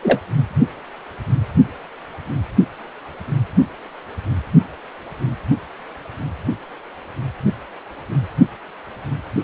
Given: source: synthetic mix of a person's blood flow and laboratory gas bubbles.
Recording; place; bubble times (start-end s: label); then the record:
Doppler ultrasound of blood flow; precordium
0.02-0.20 s: bubbles
From the record:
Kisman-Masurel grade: 123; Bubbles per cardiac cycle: 1 to 2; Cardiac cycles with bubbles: 10 to 50%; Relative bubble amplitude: loud (0.450 to 0.775); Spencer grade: 2 (many but less than half of the cardiac periods contain bubble signals, singularly or in groups); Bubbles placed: anywhere in the cardiac cycle